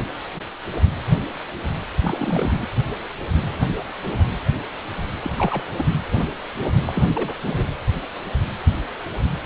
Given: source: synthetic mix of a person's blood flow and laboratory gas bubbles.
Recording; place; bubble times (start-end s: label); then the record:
Doppler ultrasound of blood flow; precordium
2.00-2.68 s: bubbles
5.23-5.30 s: bubbles
5.38-5.63 s: bubbles
5.76-5.84 s: bubbles
6.86-7.36 s: bubbles
7.42-7.65 s: bubbles
From the record:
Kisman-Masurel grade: 222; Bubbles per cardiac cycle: several, 3 to 8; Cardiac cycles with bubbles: 10 to 50%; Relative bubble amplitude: moderate (0.250 to 0.450); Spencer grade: 2 (many but less than half of the cardiac periods contain bubble signals, singularly or in groups); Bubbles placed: anywhere in the cardiac cycle